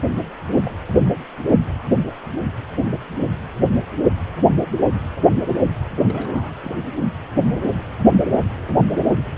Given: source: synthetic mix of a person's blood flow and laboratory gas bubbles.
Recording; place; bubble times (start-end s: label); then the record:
Doppler ultrasound of blood flow; precordium
0.11-0.20 s: bubbles
0.53-0.72 s: bubbles
6.03-6.53 s: bubbles
6.62-6.71 s: bubbles
From the record:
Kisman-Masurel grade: 221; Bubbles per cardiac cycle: several, 3 to 8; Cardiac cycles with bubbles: 10 to 50%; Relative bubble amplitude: barely perceptible (0.100 to 0.250); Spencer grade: 2 (many but less than half of the cardiac periods contain bubble signals, singularly or in groups); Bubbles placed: anywhere in the cardiac cycle